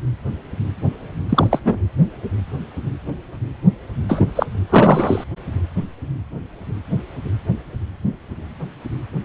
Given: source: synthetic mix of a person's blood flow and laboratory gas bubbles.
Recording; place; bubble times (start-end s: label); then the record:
Doppler ultrasound of blood flow; precordium
1.29-1.60 s: bubbles
1.65-1.78 s: bubbles
4.08-4.31 s: bubbles
4.35-4.46 s: bubbles
4.69-5.24 s: bubbles
From the record:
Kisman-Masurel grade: 223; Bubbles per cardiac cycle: several, 3 to 8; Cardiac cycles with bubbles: 10 to 50%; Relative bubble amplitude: loud (0.450 to 0.775); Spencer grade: 2 (many but less than half of the cardiac periods contain bubble signals, singularly or in groups); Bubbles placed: anywhere in the cardiac cycle